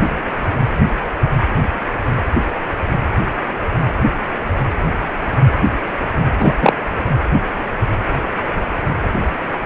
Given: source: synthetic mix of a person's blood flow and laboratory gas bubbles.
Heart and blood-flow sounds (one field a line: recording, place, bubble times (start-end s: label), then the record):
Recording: Doppler ultrasound of blood flow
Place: precordium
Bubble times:
6.38-6.53 s: bubbles
6.61-6.73 s: bubbles
From the record:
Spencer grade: 1 (occasional bubble signal discernible with the cardiac motion signal, with majority of cardiac periods free of bubbles)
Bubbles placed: anywhere in the cardiac cycle